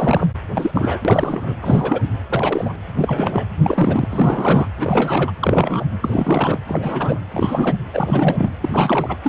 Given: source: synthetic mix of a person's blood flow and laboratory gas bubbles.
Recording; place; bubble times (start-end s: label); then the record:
Doppler ultrasound of blood flow; precordium
0.00-0.27 s: bubbles
0.54-0.99 s: bubbles
1.04-1.53 s: bubbles
1.61-2.05 s: bubbles
2.29-2.74 s: bubbles
2.95-3.46 s: bubbles
3.62-4.68 s: bubbles
4.78-5.33 s: bubbles
5.39-5.84 s: bubbles
6.01-6.58 s: bubbles
6.67-7.19 s: bubbles
7.33-7.76 s: bubbles
7.93-8.51 s: bubbles
8.61-9.16 s: bubbles
9.23-9.29 s: bubbles
From the record:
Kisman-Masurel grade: 342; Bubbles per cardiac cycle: rolling drumbeat, 9 or more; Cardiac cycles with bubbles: 100%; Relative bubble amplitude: moderate (0.250 to 0.450); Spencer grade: 3 (all of the cardiac periods contain showers or single bubble signals, but not dominating or overriding the cardiac motion signals); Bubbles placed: anywhere in the cardiac cycle